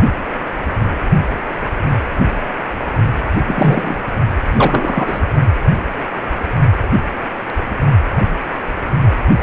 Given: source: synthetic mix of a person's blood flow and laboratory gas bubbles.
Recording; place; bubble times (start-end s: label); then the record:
Doppler ultrasound of blood flow; precordium
3.47-4.02 s: bubbles
4.56-5.20 s: bubbles
From the record:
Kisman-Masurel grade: 223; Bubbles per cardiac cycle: several, 3 to 8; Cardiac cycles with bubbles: 10 to 50%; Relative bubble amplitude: loud (0.450 to 0.775); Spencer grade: 2 (many but less than half of the cardiac periods contain bubble signals, singularly or in groups); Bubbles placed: only in the low amplitude regions of the cardiac cycle